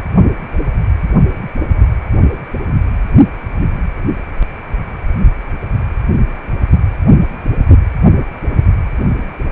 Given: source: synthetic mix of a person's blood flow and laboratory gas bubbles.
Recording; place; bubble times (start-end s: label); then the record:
Doppler ultrasound of blood flow; precordium
no bubbles
From the record:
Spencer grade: 0 (complete lack of bubble signals)